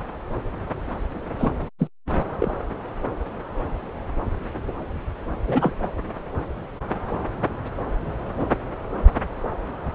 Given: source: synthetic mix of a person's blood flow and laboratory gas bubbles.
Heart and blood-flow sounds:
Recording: Doppler ultrasound of blood flow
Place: subclavian vein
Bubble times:
1.39-1.52 s: bubbles
1.78-1.89 s: bubbles
2.40-2.53 s: bubbles
5.47-5.74 s: bubbles
5.81-5.90 s: bubbles
From the record:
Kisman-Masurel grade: 222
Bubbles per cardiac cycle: several, 3 to 8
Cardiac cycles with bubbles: 10 to 50%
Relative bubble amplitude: moderate (0.250 to 0.450)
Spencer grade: 2 (many but less than half of the cardiac periods contain bubble signals, singularly or in groups)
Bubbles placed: anywhere in the cardiac cycle

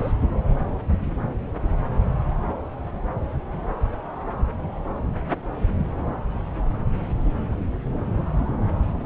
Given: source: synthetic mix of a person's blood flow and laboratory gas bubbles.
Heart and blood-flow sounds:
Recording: Doppler ultrasound of blood flow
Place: subclavian vein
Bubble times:
0.00-0.12 s: bubbles
From the record:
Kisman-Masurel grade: 213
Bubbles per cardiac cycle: several, 3 to 8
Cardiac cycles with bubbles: 1 to 10%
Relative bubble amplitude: loud (0.450 to 0.775)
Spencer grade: 1 (occasional bubble signal discernible with the cardiac motion signal, with majority of cardiac periods free of bubbles)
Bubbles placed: anywhere in the cardiac cycle

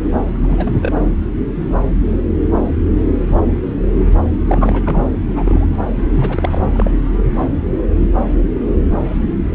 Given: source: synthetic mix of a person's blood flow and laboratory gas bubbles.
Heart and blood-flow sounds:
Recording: Doppler ultrasound of blood flow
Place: subclavian vein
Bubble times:
0.40-0.72 s: bubbles
0.75-0.92 s: bubbles
0.96-1.07 s: bubbles
4.47-4.81 s: bubbles
4.86-5.04 s: bubbles
5.31-5.75 s: bubbles
6.13-6.67 s: bubbles
6.74-6.90 s: bubbles
From the record:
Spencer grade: 2 (many but less than half of the cardiac periods contain bubble signals, singularly or in groups)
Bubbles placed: anywhere in the cardiac cycle

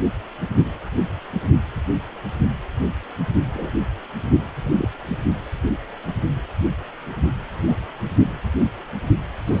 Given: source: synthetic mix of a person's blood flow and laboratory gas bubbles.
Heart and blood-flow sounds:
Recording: Doppler ultrasound of blood flow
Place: precordium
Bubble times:
3.54-3.71 s: bubbles
4.63-4.87 s: bubbles
7.66-7.77 s: bubbles
9.47-9.60 s: bubbles
From the record:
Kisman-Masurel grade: 122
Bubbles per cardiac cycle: 1 to 2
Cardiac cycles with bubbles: 10 to 50%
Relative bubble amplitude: moderate (0.250 to 0.450)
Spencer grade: 2 (many but less than half of the cardiac periods contain bubble signals, singularly or in groups)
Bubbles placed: only in the low amplitude regions of the cardiac cycle

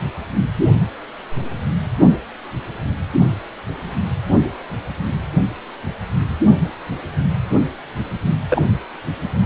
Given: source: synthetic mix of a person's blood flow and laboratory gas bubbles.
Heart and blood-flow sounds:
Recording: Doppler ultrasound of blood flow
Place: precordium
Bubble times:
8.48-8.62 s: bubbles
From the record:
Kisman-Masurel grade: 112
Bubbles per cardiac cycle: 1 to 2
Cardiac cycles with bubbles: 1 to 10%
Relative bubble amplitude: moderate (0.250 to 0.450)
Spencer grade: 1 (occasional bubble signal discernible with the cardiac motion signal, with majority of cardiac periods free of bubbles)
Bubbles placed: only in the low amplitude regions of the cardiac cycle

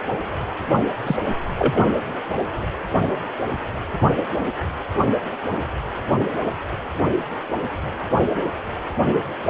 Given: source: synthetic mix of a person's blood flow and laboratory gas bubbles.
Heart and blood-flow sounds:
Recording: Doppler ultrasound of blood flow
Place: precordium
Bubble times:
1.05-1.17 s: bubbles
1.58-1.85 s: bubbles
From the record:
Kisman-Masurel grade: 113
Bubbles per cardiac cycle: 1 to 2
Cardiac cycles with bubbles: 1 to 10%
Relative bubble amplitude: loud (0.450 to 0.775)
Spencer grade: 1 (occasional bubble signal discernible with the cardiac motion signal, with majority of cardiac periods free of bubbles)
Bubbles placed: anywhere in the cardiac cycle

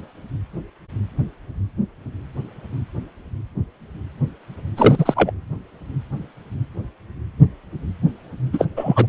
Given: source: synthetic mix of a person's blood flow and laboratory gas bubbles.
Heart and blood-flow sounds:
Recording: Doppler ultrasound of blood flow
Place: precordium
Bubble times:
4.76-5.31 s: bubbles
8.53-8.66 s: bubbles
8.76-9.06 s: bubbles
From the record:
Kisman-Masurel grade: 223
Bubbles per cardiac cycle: several, 3 to 8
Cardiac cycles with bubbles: 10 to 50%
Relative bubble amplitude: loud (0.450 to 0.775)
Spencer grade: 2 (many but less than half of the cardiac periods contain bubble signals, singularly or in groups)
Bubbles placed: anywhere in the cardiac cycle

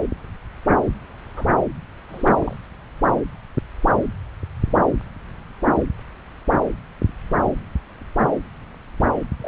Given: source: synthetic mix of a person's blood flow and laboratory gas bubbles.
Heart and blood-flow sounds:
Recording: Doppler ultrasound of blood flow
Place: subclavian vein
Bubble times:
1.36-1.45 s: bubbles
2.09-2.56 s: bubbles
9.41-9.48 s: bubbles
From the record:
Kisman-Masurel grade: 121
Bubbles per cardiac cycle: 1 to 2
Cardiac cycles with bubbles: 10 to 50%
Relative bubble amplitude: barely perceptible (0.100 to 0.250)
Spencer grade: 2 (many but less than half of the cardiac periods contain bubble signals, singularly or in groups)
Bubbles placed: anywhere in the cardiac cycle

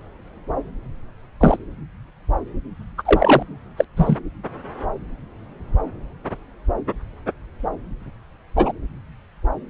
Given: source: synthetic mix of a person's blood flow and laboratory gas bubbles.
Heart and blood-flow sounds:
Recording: Doppler ultrasound of blood flow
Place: subclavian vein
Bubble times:
1.40-1.56 s: bubbles
2.97-3.02 s: bubbles
3.05-3.42 s: bubbles
3.76-3.85 s: bubbles
3.96-4.17 s: bubbles
8.56-8.72 s: bubbles
From the record:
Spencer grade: 2 (many but less than half of the cardiac periods contain bubble signals, singularly or in groups)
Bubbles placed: anywhere in the cardiac cycle

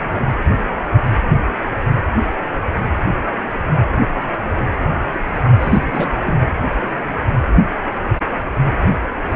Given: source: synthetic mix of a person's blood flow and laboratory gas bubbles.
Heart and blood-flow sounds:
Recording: Doppler ultrasound of blood flow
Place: precordium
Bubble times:
5.60-6.16 s: bubbles
6.25-6.34 s: bubbles
From the record:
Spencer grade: 1 (occasional bubble signal discernible with the cardiac motion signal, with majority of cardiac periods free of bubbles)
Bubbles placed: anywhere in the cardiac cycle

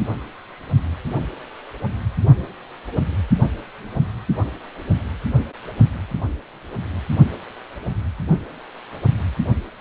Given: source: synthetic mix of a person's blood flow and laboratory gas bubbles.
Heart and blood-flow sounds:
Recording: Doppler ultrasound of blood flow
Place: precordium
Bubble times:
no bubbles
From the record:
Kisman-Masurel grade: 000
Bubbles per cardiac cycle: 0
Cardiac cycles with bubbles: 0%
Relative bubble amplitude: no bubbles discernible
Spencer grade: 0 (complete lack of bubble signals)

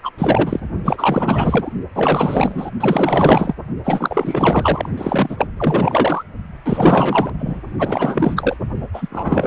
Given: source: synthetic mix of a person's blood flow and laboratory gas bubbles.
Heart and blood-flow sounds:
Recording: Doppler ultrasound of blood flow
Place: precordium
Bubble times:
0.03-0.11 s: bubbles
0.18-0.60 s: bubbles
0.84-1.72 s: bubbles
1.95-2.71 s: bubbles
2.80-3.53 s: bubbles
3.83-4.89 s: bubbles
4.97-5.47 s: bubbles
5.56-6.24 s: bubbles
6.66-7.32 s: bubbles
7.38-7.61 s: bubbles
7.79-8.56 s: bubbles
8.94-9.47 s: bubbles
From the record:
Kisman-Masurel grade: 444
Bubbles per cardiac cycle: continuous sound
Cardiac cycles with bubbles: 100%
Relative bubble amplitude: maximal (0.775 to 0.999)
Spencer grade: 4 (maximum detectable bubble signal sounding continuously throughout systole and diastole of every cardiac period, and overriding the amplitude of the normal cardiac signals)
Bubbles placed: only in the low amplitude regions of the cardiac cycle

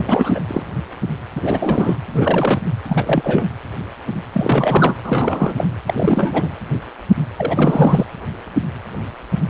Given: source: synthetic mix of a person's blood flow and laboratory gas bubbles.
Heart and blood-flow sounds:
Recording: Doppler ultrasound of blood flow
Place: precordium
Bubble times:
0.00-0.40 s: bubbles
0.48-0.63 s: bubbles
1.35-1.96 s: bubbles
2.13-2.78 s: bubbles
2.88-3.47 s: bubbles
4.33-4.96 s: bubbles
5.04-5.67 s: bubbles
5.85-6.48 s: bubbles
7.34-8.05 s: bubbles
From the record:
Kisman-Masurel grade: 333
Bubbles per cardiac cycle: rolling drumbeat, 9 or more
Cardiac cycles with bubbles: 50 to 99%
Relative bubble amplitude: loud (0.450 to 0.775)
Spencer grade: 3 (all of the cardiac periods contain showers or single bubble signals, but not dominating or overriding the cardiac motion signals)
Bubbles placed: anywhere in the cardiac cycle

